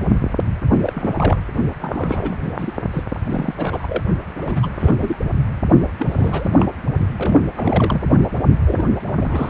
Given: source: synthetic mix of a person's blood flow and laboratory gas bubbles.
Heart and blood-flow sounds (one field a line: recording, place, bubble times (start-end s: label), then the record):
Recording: Doppler ultrasound of blood flow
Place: precordium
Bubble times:
0.82-1.13 s: bubbles
1.17-1.40 s: bubbles
1.81-2.40 s: bubbles
2.44-2.77 s: bubbles
2.92-3.03 s: bubbles
3.23-3.54 s: bubbles
3.57-4.01 s: bubbles
4.41-4.94 s: bubbles
5.00-5.16 s: bubbles
5.98-6.69 s: bubbles
7.17-7.40 s: bubbles
7.55-8.23 s: bubbles
8.65-8.83 s: bubbles
9.07-9.49 s: bubbles
From the record:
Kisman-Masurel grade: 342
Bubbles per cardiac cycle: rolling drumbeat, 9 or more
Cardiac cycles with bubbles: 100%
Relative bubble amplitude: moderate (0.250 to 0.450)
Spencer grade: 3 (all of the cardiac periods contain showers or single bubble signals, but not dominating or overriding the cardiac motion signals)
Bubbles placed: only in the low amplitude regions of the cardiac cycle